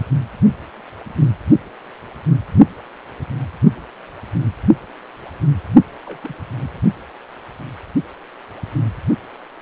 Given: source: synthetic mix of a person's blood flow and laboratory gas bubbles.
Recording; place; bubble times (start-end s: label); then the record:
Doppler ultrasound of blood flow; precordium
6.05-6.18 s: bubbles
6.23-6.34 s: bubbles
6.59-6.80 s: bubbles
From the record:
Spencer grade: 2 (many but less than half of the cardiac periods contain bubble signals, singularly or in groups); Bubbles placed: only in the low amplitude regions of the cardiac cycle